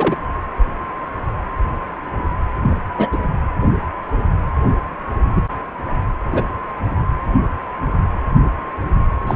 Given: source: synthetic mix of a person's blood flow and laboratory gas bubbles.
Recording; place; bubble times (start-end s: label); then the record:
Doppler ultrasound of blood flow; precordium
0.00-0.17 s: bubbles
2.62-2.77 s: bubbles
2.98-3.08 s: bubbles
3.12-3.18 s: bubbles
5.36-5.42 s: bubbles
6.32-6.52 s: bubbles
9.27-9.35 s: bubbles
From the record:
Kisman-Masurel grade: 223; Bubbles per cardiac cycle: several, 3 to 8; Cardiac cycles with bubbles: 10 to 50%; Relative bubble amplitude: loud (0.450 to 0.775); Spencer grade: 2 (many but less than half of the cardiac periods contain bubble signals, singularly or in groups); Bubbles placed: anywhere in the cardiac cycle